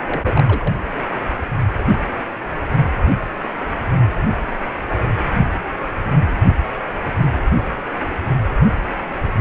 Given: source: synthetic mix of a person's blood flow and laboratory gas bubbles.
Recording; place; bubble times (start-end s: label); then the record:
Doppler ultrasound of blood flow; precordium
0.05-0.44 s: bubbles
0.47-0.74 s: bubbles
From the record:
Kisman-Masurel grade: 211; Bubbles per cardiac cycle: several, 3 to 8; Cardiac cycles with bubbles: 1 to 10%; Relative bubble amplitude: barely perceptible (0.100 to 0.250); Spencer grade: 1 (occasional bubble signal discernible with the cardiac motion signal, with majority of cardiac periods free of bubbles); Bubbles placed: anywhere in the cardiac cycle